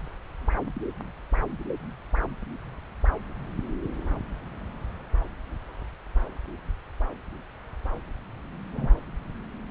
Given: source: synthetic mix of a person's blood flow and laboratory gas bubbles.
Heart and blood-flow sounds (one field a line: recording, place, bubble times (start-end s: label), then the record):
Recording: Doppler ultrasound of blood flow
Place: subclavian vein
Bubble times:
8.72-8.97 s: bubbles
From the record:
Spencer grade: 1 (occasional bubble signal discernible with the cardiac motion signal, with majority of cardiac periods free of bubbles)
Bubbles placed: anywhere in the cardiac cycle